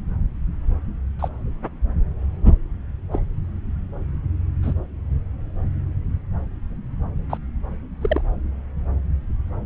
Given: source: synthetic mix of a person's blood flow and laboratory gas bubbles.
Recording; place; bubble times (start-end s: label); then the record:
Doppler ultrasound of blood flow; subclavian vein
1.19-1.29 s: bubbles
3.12-3.19 s: bubbles
4.62-4.73 s: bubbles
7.29-7.38 s: bubbles
8.01-8.22 s: bubbles
From the record:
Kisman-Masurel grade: 122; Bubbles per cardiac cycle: 1 to 2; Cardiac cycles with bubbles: 10 to 50%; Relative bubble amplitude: moderate (0.250 to 0.450); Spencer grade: 2 (many but less than half of the cardiac periods contain bubble signals, singularly or in groups); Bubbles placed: anywhere in the cardiac cycle